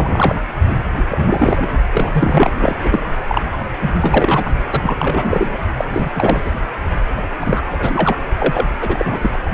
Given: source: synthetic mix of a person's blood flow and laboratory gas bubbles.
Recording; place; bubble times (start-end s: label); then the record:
Doppler ultrasound of blood flow; precordium
0.00-0.35 s: bubbles
0.96-1.04 s: bubbles
1.09-1.68 s: bubbles
1.93-2.75 s: bubbles
2.84-3.00 s: bubbles
3.28-3.42 s: bubbles
3.52-3.58 s: bubbles
3.81-3.90 s: bubbles
4.01-4.51 s: bubbles
4.71-5.57 s: bubbles
5.76-5.84 s: bubbles
5.93-6.09 s: bubbles
6.14-6.40 s: bubbles
6.44-6.51 s: bubbles
7.17-7.22 s: bubbles
7.39-7.60 s: bubbles
7.70-8.17 s: bubbles
8.40-8.66 s: bubbles
8.80-9.31 s: bubbles
9.46-9.54 s: bubbles
From the record:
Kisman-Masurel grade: 343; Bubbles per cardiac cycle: rolling drumbeat, 9 or more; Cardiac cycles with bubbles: 100%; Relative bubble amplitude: loud (0.450 to 0.775); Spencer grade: 3 (all of the cardiac periods contain showers or single bubble signals, but not dominating or overriding the cardiac motion signals); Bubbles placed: only in the low amplitude regions of the cardiac cycle